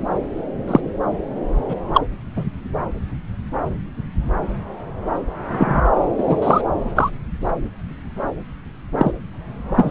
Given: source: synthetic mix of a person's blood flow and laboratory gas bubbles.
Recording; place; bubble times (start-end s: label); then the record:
Doppler ultrasound of blood flow; subclavian vein
0.68-0.80 s: bubbles
1.69-1.73 s: bubbles
1.93-2.02 s: bubbles
2.36-2.44 s: bubbles
5.48-5.81 s: bubbles
6.18-6.62 s: bubbles
6.95-7.10 s: bubbles
8.97-9.12 s: bubbles
9.76-9.90 s: bubbles
From the record:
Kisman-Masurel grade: 123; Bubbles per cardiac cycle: 1 to 2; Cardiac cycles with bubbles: 10 to 50%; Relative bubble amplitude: loud (0.450 to 0.775); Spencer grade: 2 (many but less than half of the cardiac periods contain bubble signals, singularly or in groups); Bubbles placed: anywhere in the cardiac cycle